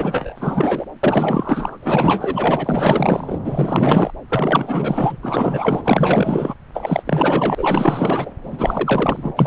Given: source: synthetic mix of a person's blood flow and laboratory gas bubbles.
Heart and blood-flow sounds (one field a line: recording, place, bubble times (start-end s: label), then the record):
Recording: Doppler ultrasound of blood flow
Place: subclavian vein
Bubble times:
0.00-0.85 s: bubbles
1.03-1.78 s: bubbles
1.82-3.38 s: bubbles
3.45-4.11 s: bubbles
4.29-5.17 s: bubbles
5.22-5.81 s: bubbles
5.84-6.54 s: bubbles
6.74-7.03 s: bubbles
7.05-8.31 s: bubbles
8.42-9.32 s: bubbles
9.37-9.47 s: bubbles
From the record:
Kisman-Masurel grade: 444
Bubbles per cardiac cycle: continuous sound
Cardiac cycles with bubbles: 100%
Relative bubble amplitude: maximal (0.775 to 0.999)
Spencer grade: 4 (maximum detectable bubble signal sounding continuously throughout systole and diastole of every cardiac period, and overriding the amplitude of the normal cardiac signals)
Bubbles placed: anywhere in the cardiac cycle